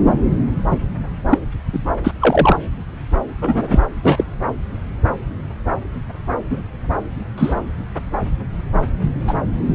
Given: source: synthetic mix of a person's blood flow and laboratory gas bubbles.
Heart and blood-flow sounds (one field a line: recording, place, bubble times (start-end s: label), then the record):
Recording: Doppler ultrasound of blood flow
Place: subclavian vein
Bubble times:
0.70-0.77 s: bubbles
1.29-1.39 s: bubbles
1.73-1.79 s: bubbles
2.04-2.12 s: bubbles
2.20-2.57 s: bubbles
3.41-3.80 s: bubbles
4.03-4.25 s: bubbles
6.50-6.60 s: bubbles
7.38-7.54 s: bubbles
9.28-9.35 s: bubbles
From the record:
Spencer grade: 2 (many but less than half of the cardiac periods contain bubble signals, singularly or in groups)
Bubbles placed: anywhere in the cardiac cycle